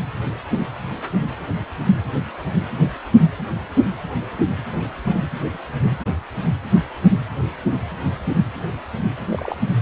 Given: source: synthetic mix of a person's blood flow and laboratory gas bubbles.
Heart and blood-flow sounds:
Doppler ultrasound of blood flow; precordium
9.31-9.56 s: bubbles
From the record:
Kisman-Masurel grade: 112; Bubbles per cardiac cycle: 1 to 2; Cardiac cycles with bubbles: 1 to 10%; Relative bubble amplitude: moderate (0.250 to 0.450); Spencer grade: 1 (occasional bubble signal discernible with the cardiac motion signal, with majority of cardiac periods free of bubbles); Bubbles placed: anywhere in the cardiac cycle

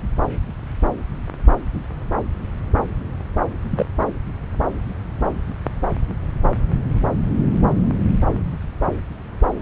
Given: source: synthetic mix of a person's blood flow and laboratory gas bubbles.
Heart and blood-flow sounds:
Doppler ultrasound of blood flow; subclavian vein
3.70-3.85 s: bubbles
From the record:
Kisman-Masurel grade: 112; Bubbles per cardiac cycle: 1 to 2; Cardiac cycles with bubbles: 1 to 10%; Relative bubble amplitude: moderate (0.250 to 0.450); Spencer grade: 1 (occasional bubble signal discernible with the cardiac motion signal, with majority of cardiac periods free of bubbles); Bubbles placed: anywhere in the cardiac cycle

